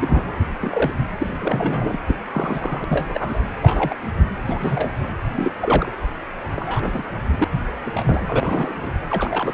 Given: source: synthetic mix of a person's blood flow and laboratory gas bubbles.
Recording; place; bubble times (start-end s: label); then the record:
Doppler ultrasound of blood flow; precordium
0.00-0.39 s: bubbles
0.60-0.92 s: bubbles
1.18-1.26 s: bubbles
1.39-1.98 s: bubbles
2.07-2.15 s: bubbles
2.32-2.84 s: bubbles
2.88-3.39 s: bubbles
3.62-3.96 s: bubbles
4.44-4.92 s: bubbles
5.35-5.51 s: bubbles
5.60-5.91 s: bubbles
6.55-7.02 s: bubbles
7.37-7.44 s: bubbles
7.81-8.21 s: bubbles
8.27-8.90 s: bubbles
9.10-9.54 s: bubbles
From the record:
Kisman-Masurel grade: 242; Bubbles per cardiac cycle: several, 3 to 8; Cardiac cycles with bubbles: 100%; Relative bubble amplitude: moderate (0.250 to 0.450); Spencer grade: 3 (all of the cardiac periods contain showers or single bubble signals, but not dominating or overriding the cardiac motion signals); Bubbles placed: anywhere in the cardiac cycle